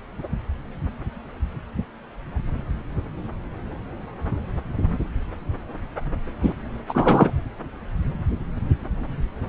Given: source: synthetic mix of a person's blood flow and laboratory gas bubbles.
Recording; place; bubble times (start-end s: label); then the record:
Doppler ultrasound of blood flow; subclavian vein
6.42-6.54 s: bubbles
6.88-7.31 s: bubbles
From the record:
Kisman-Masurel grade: 213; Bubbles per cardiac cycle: several, 3 to 8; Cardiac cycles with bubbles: 1 to 10%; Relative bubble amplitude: loud (0.450 to 0.775); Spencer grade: 1 (occasional bubble signal discernible with the cardiac motion signal, with majority of cardiac periods free of bubbles); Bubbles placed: anywhere in the cardiac cycle